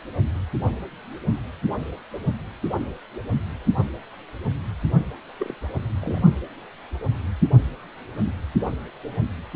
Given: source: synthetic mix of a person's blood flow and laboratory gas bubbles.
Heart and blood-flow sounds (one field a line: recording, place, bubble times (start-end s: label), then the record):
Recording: Doppler ultrasound of blood flow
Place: precordium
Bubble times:
5.39-5.55 s: bubbles
6.01-6.19 s: bubbles
From the record:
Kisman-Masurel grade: 111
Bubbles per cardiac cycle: 1 to 2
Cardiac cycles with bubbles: 1 to 10%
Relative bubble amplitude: barely perceptible (0.100 to 0.250)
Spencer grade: 1 (occasional bubble signal discernible with the cardiac motion signal, with majority of cardiac periods free of bubbles)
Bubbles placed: only in the low amplitude regions of the cardiac cycle